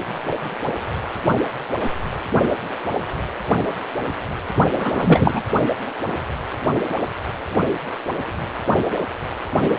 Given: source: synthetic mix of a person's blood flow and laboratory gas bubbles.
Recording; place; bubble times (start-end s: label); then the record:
Doppler ultrasound of blood flow; precordium
4.77-5.42 s: bubbles
From the record:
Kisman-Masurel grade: 213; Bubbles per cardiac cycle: several, 3 to 8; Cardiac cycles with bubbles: 1 to 10%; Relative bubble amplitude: loud (0.450 to 0.775); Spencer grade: 1 (occasional bubble signal discernible with the cardiac motion signal, with majority of cardiac periods free of bubbles); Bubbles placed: only in the low amplitude regions of the cardiac cycle